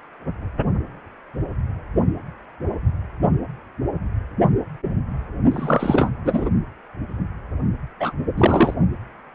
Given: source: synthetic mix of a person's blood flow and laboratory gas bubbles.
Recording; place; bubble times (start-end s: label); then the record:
Doppler ultrasound of blood flow; precordium
5.51-6.10 s: bubbles
6.25-6.49 s: bubbles
7.99-8.13 s: bubbles
8.37-8.74 s: bubbles
From the record:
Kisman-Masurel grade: 223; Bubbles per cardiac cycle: several, 3 to 8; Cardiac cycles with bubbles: 10 to 50%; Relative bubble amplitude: loud (0.450 to 0.775); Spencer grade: 2 (many but less than half of the cardiac periods contain bubble signals, singularly or in groups); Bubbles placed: only in the low amplitude regions of the cardiac cycle